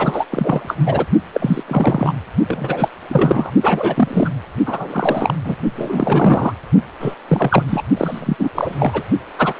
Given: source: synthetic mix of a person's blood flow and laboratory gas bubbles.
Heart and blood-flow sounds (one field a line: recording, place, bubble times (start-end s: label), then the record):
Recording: Doppler ultrasound of blood flow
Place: precordium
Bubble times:
0.00-0.24 s: bubbles
0.30-0.76 s: bubbles
0.85-1.06 s: bubbles
1.33-1.63 s: bubbles
1.68-2.13 s: bubbles
2.48-2.89 s: bubbles
3.10-3.51 s: bubbles
3.63-4.29 s: bubbles
4.66-5.36 s: bubbles
5.44-5.55 s: bubbles
5.76-6.54 s: bubbles
7.00-7.15 s: bubbles
7.28-7.64 s: bubbles
7.67-7.84 s: bubbles
7.96-8.36 s: bubbles
8.38-8.49 s: bubbles
8.54-9.03 s: bubbles
9.38-9.54 s: bubbles
From the record:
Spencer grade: 3 (all of the cardiac periods contain showers or single bubble signals, but not dominating or overriding the cardiac motion signals)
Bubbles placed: only in the low amplitude regions of the cardiac cycle